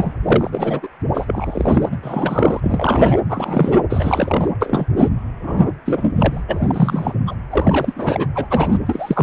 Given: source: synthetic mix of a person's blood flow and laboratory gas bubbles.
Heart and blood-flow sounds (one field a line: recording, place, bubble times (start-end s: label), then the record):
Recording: Doppler ultrasound of blood flow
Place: precordium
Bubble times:
0.00-0.12 s: bubbles
0.24-0.88 s: bubbles
1.14-1.96 s: bubbles
2.03-3.18 s: bubbles
3.28-3.79 s: bubbles
3.90-4.51 s: bubbles
4.61-4.86 s: bubbles
4.97-5.09 s: bubbles
5.43-5.72 s: bubbles
5.86-6.12 s: bubbles
6.15-6.42 s: bubbles
6.48-7.14 s: bubbles
7.27-7.35 s: bubbles
7.51-8.26 s: bubbles
8.35-8.47 s: bubbles
8.50-8.78 s: bubbles
8.86-9.22 s: bubbles
From the record:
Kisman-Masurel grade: 342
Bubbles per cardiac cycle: rolling drumbeat, 9 or more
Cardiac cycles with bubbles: 100%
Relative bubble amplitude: moderate (0.250 to 0.450)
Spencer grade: 3 (all of the cardiac periods contain showers or single bubble signals, but not dominating or overriding the cardiac motion signals)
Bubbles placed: anywhere in the cardiac cycle